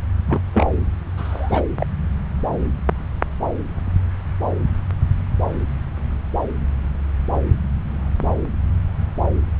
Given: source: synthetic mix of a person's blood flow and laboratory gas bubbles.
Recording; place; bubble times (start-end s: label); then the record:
Doppler ultrasound of blood flow; subclavian vein
0.26-0.41 s: bubbles
0.53-0.65 s: bubbles
1.17-1.63 s: bubbles
1.78-1.86 s: bubbles
From the record:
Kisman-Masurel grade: 212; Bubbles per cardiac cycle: several, 3 to 8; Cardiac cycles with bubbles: 1 to 10%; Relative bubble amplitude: moderate (0.250 to 0.450); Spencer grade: 1 (occasional bubble signal discernible with the cardiac motion signal, with majority of cardiac periods free of bubbles); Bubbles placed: anywhere in the cardiac cycle